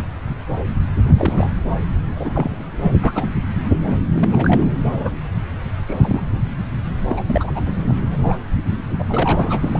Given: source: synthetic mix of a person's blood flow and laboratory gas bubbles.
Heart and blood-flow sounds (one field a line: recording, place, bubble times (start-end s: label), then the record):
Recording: Doppler ultrasound of blood flow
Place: subclavian vein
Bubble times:
1.04-1.52 s: bubbles
2.16-2.56 s: bubbles
3.00-3.27 s: bubbles
4.15-4.63 s: bubbles
4.93-5.12 s: bubbles
5.85-6.21 s: bubbles
7.09-7.23 s: bubbles
7.27-7.52 s: bubbles
7.54-7.72 s: bubbles
7.88-7.93 s: bubbles
8.11-8.40 s: bubbles
8.99-9.04 s: bubbles
9.09-9.80 s: bubbles
From the record:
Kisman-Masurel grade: 232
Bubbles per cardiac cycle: several, 3 to 8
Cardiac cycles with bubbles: 50 to 99%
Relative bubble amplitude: moderate (0.250 to 0.450)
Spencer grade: 3 (all of the cardiac periods contain showers or single bubble signals, but not dominating or overriding the cardiac motion signals)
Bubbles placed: anywhere in the cardiac cycle